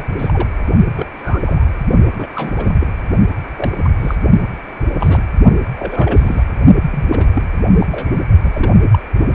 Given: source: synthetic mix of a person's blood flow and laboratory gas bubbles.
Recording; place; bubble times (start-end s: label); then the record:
Doppler ultrasound of blood flow; precordium
0.00-0.05 s: bubbles
0.09-0.49 s: bubbles
0.95-1.06 s: bubbles
1.17-1.66 s: bubbles
2.15-2.28 s: bubbles
2.36-2.76 s: bubbles
2.79-2.87 s: bubbles
3.57-3.74 s: bubbles
3.83-3.90 s: bubbles
4.00-4.16 s: bubbles
5.00-5.23 s: bubbles
5.78-6.43 s: bubbles
6.90-7.07 s: bubbles
7.11-7.27 s: bubbles
7.35-7.42 s: bubbles
7.79-7.87 s: bubbles
7.89-8.22 s: bubbles
8.43-8.99 s: bubbles
9.32-9.35 s: bubbles
From the record:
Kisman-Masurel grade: 242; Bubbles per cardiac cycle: several, 3 to 8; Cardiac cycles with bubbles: 100%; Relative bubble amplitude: moderate (0.250 to 0.450); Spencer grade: 3 (all of the cardiac periods contain showers or single bubble signals, but not dominating or overriding the cardiac motion signals); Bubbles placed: only in the low amplitude regions of the cardiac cycle